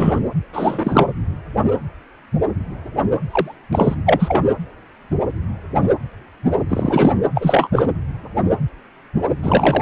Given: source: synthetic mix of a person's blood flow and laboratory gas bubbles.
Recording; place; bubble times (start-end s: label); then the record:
Doppler ultrasound of blood flow; precordium
0.00-0.19 s: bubbles
0.53-1.07 s: bubbles
3.30-3.55 s: bubbles
3.72-3.94 s: bubbles
4.06-4.44 s: bubbles
6.68-7.12 s: bubbles
7.35-7.69 s: bubbles
7.73-7.88 s: bubbles
9.43-9.82 s: bubbles
From the record:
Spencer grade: 2 (many but less than half of the cardiac periods contain bubble signals, singularly or in groups); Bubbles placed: anywhere in the cardiac cycle